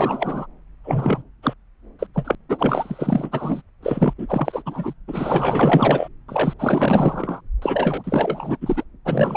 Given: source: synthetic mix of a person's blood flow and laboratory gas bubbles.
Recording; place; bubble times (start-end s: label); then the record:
Doppler ultrasound of blood flow; subclavian vein
0.00-0.46 s: bubbles
0.84-1.22 s: bubbles
1.42-1.54 s: bubbles
1.99-2.06 s: bubbles
2.14-2.35 s: bubbles
2.49-3.62 s: bubbles
3.82-4.13 s: bubbles
4.18-4.62 s: bubbles
4.65-4.93 s: bubbles
5.07-6.08 s: bubbles
6.28-6.53 s: bubbles
6.58-7.40 s: bubbles
7.61-8.57 s: bubbles
8.61-8.84 s: bubbles
9.05-9.36 s: bubbles
From the record:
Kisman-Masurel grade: 444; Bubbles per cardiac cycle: continuous sound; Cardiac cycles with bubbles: 100%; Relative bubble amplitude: maximal (0.775 to 0.999); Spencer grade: 4 (maximum detectable bubble signal sounding continuously throughout systole and diastole of every cardiac period, and overriding the amplitude of the normal cardiac signals); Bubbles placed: anywhere in the cardiac cycle